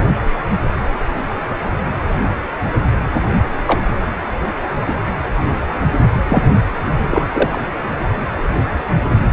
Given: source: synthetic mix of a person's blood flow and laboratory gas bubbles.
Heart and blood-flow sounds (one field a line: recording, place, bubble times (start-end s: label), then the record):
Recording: Doppler ultrasound of blood flow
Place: precordium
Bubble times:
3.67-3.81 s: bubbles
4.87-4.96 s: bubbles
6.29-6.44 s: bubbles
7.10-7.24 s: bubbles
7.33-7.62 s: bubbles
From the record:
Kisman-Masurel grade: 123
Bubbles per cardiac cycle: 1 to 2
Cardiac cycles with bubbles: 10 to 50%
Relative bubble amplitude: loud (0.450 to 0.775)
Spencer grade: 2 (many but less than half of the cardiac periods contain bubble signals, singularly or in groups)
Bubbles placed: anywhere in the cardiac cycle